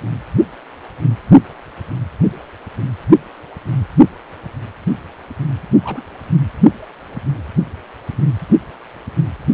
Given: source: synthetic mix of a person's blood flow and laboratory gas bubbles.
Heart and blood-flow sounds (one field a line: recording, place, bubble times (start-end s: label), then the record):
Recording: Doppler ultrasound of blood flow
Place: precordium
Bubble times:
5.83-6.04 s: bubbles
From the record:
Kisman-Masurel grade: 111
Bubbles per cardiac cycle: 1 to 2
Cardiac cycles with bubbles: 1 to 10%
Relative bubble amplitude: barely perceptible (0.100 to 0.250)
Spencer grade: 1 (occasional bubble signal discernible with the cardiac motion signal, with majority of cardiac periods free of bubbles)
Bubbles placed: only in the low amplitude regions of the cardiac cycle